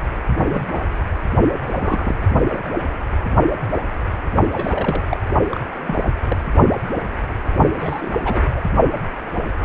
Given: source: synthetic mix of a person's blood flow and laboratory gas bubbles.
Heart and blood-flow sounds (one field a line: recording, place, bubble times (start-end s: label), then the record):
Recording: Doppler ultrasound of blood flow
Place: precordium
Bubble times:
0.45-0.66 s: bubbles
0.71-0.80 s: bubbles
1.67-2.15 s: bubbles
4.53-5.04 s: bubbles
5.11-5.17 s: bubbles
5.52-5.61 s: bubbles
5.84-6.11 s: bubbles
6.28-6.38 s: bubbles
7.79-8.10 s: bubbles
8.24-8.42 s: bubbles
8.56-8.61 s: bubbles
From the record:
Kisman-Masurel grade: 232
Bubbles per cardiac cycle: several, 3 to 8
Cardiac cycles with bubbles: 50 to 99%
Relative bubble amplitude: moderate (0.250 to 0.450)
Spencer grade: 3 (all of the cardiac periods contain showers or single bubble signals, but not dominating or overriding the cardiac motion signals)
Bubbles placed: only in the low amplitude regions of the cardiac cycle